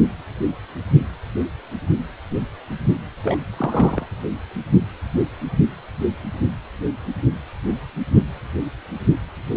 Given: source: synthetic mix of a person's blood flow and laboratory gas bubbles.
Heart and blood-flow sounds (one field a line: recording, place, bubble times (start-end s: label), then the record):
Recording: Doppler ultrasound of blood flow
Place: precordium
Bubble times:
3.23-3.38 s: bubbles
3.57-4.06 s: bubbles
From the record:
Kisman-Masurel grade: 112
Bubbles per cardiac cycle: 1 to 2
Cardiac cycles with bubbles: 1 to 10%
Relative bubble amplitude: moderate (0.250 to 0.450)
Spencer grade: 1 (occasional bubble signal discernible with the cardiac motion signal, with majority of cardiac periods free of bubbles)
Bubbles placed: anywhere in the cardiac cycle